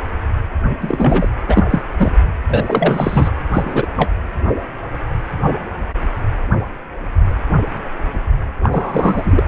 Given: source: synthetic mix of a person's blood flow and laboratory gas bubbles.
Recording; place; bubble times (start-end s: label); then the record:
Doppler ultrasound of blood flow; precordium
0.80-1.29 s: bubbles
1.48-1.64 s: bubbles
1.70-1.81 s: bubbles
2.00-2.13 s: bubbles
2.48-3.32 s: bubbles
3.53-3.86 s: bubbles
3.97-4.11 s: bubbles
8.63-9.44 s: bubbles
From the record:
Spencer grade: 2 (many but less than half of the cardiac periods contain bubble signals, singularly or in groups); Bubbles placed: anywhere in the cardiac cycle